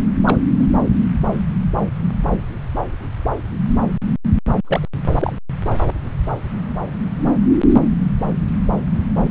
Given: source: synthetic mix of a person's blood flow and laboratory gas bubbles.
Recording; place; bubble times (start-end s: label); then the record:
Doppler ultrasound of blood flow; subclavian vein
0.26-0.37 s: bubbles
0.59-0.66 s: bubbles
4.64-4.88 s: bubbles
5.19-5.32 s: bubbles
From the record:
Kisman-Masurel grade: 122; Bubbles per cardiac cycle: 1 to 2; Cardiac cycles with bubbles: 10 to 50%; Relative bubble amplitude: moderate (0.250 to 0.450); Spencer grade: 2 (many but less than half of the cardiac periods contain bubble signals, singularly or in groups); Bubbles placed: anywhere in the cardiac cycle